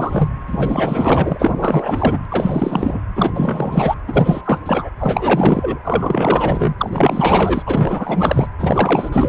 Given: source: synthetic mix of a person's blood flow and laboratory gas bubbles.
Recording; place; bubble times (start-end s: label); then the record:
Doppler ultrasound of blood flow; precordium
0.00-0.29 s: bubbles
0.47-2.25 s: bubbles
2.29-3.02 s: bubbles
3.15-3.96 s: bubbles
4.08-4.41 s: bubbles
4.44-4.62 s: bubbles
4.66-4.89 s: bubbles
4.99-5.79 s: bubbles
5.84-6.75 s: bubbles
6.78-7.62 s: bubbles
7.66-8.48 s: bubbles
8.58-9.10 s: bubbles
9.12-9.29 s: bubbles
From the record:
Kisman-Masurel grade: 444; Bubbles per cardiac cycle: continuous sound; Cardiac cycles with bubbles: 100%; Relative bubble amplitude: maximal (0.775 to 0.999); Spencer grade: 4 (maximum detectable bubble signal sounding continuously throughout systole and diastole of every cardiac period, and overriding the amplitude of the normal cardiac signals); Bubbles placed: anywhere in the cardiac cycle